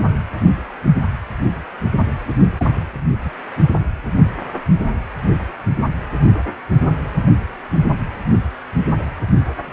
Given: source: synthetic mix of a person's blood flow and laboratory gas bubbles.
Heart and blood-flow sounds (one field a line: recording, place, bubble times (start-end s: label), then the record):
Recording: Doppler ultrasound of blood flow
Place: precordium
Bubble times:
2.57-2.66 s: bubbles
3.25-3.32 s: bubbles
From the record:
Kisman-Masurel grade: 111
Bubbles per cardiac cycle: 1 to 2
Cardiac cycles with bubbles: 1 to 10%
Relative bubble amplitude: barely perceptible (0.100 to 0.250)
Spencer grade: 1 (occasional bubble signal discernible with the cardiac motion signal, with majority of cardiac periods free of bubbles)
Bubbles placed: anywhere in the cardiac cycle